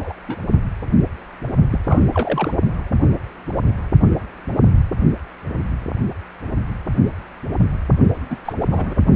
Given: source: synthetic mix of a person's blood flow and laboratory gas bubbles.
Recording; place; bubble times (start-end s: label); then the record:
Doppler ultrasound of blood flow; precordium
0.00-0.13 s: bubbles
0.27-0.39 s: bubbles
1.71-1.79 s: bubbles
1.86-2.07 s: bubbles
2.12-2.52 s: bubbles
8.29-8.37 s: bubbles
8.45-8.53 s: bubbles
8.60-9.01 s: bubbles
From the record:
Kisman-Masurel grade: 222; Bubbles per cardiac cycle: several, 3 to 8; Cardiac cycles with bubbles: 10 to 50%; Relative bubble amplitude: moderate (0.250 to 0.450); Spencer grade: 2 (many but less than half of the cardiac periods contain bubble signals, singularly or in groups); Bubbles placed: only in the low amplitude regions of the cardiac cycle